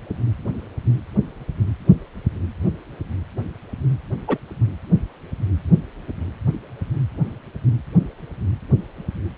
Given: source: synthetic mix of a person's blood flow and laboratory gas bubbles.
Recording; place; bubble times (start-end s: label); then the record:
Doppler ultrasound of blood flow; precordium
4.27-4.38 s: bubbles
From the record:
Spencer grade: 1 (occasional bubble signal discernible with the cardiac motion signal, with majority of cardiac periods free of bubbles); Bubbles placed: anywhere in the cardiac cycle